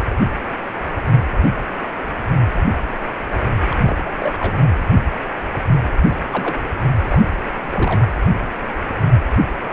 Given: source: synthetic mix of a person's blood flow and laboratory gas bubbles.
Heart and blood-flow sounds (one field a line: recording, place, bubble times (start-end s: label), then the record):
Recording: Doppler ultrasound of blood flow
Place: precordium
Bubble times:
3.70-3.77 s: bubbles
3.84-3.97 s: bubbles
4.05-4.10 s: bubbles
4.20-4.56 s: bubbles
5.97-6.15 s: bubbles
6.31-6.58 s: bubbles
7.02-7.21 s: bubbles
7.62-7.67 s: bubbles
7.71-8.06 s: bubbles
From the record:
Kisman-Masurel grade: 221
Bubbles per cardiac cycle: several, 3 to 8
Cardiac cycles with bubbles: 10 to 50%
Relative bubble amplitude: barely perceptible (0.100 to 0.250)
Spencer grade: 2 (many but less than half of the cardiac periods contain bubble signals, singularly or in groups)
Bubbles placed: anywhere in the cardiac cycle